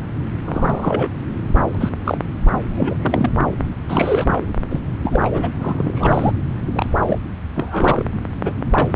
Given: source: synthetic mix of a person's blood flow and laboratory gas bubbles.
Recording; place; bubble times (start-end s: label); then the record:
Doppler ultrasound of blood flow; subclavian vein
0.44-1.09 s: bubbles
1.74-1.91 s: bubbles
2.04-2.17 s: bubbles
2.75-3.29 s: bubbles
3.89-4.40 s: bubbles
4.70-4.80 s: bubbles
5.03-5.50 s: bubbles
5.60-6.31 s: bubbles
6.73-6.89 s: bubbles
7.06-7.18 s: bubbles
7.55-8.05 s: bubbles
8.11-8.14 s: bubbles
8.43-8.53 s: bubbles
8.72-8.88 s: bubbles
From the record:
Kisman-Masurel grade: 232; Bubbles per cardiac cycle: several, 3 to 8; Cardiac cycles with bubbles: 50 to 99%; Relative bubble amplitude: moderate (0.250 to 0.450); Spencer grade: 3 (all of the cardiac periods contain showers or single bubble signals, but not dominating or overriding the cardiac motion signals); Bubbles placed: anywhere in the cardiac cycle